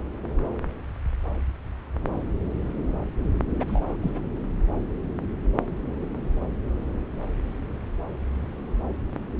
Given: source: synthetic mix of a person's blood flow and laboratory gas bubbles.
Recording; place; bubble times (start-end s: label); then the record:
Doppler ultrasound of blood flow; subclavian vein
3.59-3.96 s: bubbles
4.01-4.21 s: bubbles
From the record:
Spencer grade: 1 (occasional bubble signal discernible with the cardiac motion signal, with majority of cardiac periods free of bubbles); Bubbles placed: anywhere in the cardiac cycle